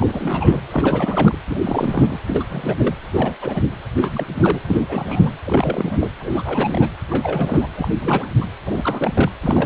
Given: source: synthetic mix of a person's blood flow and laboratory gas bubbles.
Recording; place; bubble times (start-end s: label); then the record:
Doppler ultrasound of blood flow; precordium
0.00-0.60 s: bubbles
0.72-1.38 s: bubbles
1.48-1.61 s: bubbles
1.65-2.20 s: bubbles
2.27-2.44 s: bubbles
2.50-2.96 s: bubbles
3.12-3.35 s: bubbles
3.42-3.62 s: bubbles
3.94-4.25 s: bubbles
4.38-4.58 s: bubbles
4.68-4.86 s: bubbles
4.88-5.33 s: bubbles
5.45-6.09 s: bubbles
6.19-6.89 s: bubbles
7.10-7.69 s: bubbles
7.76-7.88 s: bubbles
8.00-8.35 s: bubbles
8.41-8.46 s: bubbles
8.66-9.29 s: bubbles
9.44-9.66 s: bubbles
From the record:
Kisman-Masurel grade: 342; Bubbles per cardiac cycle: rolling drumbeat, 9 or more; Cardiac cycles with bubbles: 100%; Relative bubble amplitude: moderate (0.250 to 0.450); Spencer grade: 3 (all of the cardiac periods contain showers or single bubble signals, but not dominating or overriding the cardiac motion signals); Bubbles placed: anywhere in the cardiac cycle